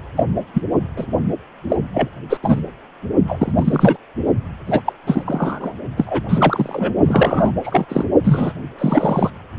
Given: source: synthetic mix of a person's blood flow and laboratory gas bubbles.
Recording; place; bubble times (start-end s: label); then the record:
Doppler ultrasound of blood flow; precordium
0.16-0.24 s: bubbles
0.53-0.62 s: bubbles
0.96-1.06 s: bubbles
1.69-1.77 s: bubbles
1.94-2.09 s: bubbles
2.29-2.38 s: bubbles
2.42-2.60 s: bubbles
3.27-3.52 s: bubbles
3.56-3.97 s: bubbles
4.66-4.81 s: bubbles
4.86-4.93 s: bubbles
5.06-5.73 s: bubbles
5.97-6.20 s: bubbles
6.29-6.92 s: bubbles
7.05-7.52 s: bubbles
7.64-7.85 s: bubbles
7.89-8.04 s: bubbles
8.23-8.53 s: bubbles
8.78-9.30 s: bubbles
From the record:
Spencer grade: 3 (all of the cardiac periods contain showers or single bubble signals, but not dominating or overriding the cardiac motion signals); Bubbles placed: only in the low amplitude regions of the cardiac cycle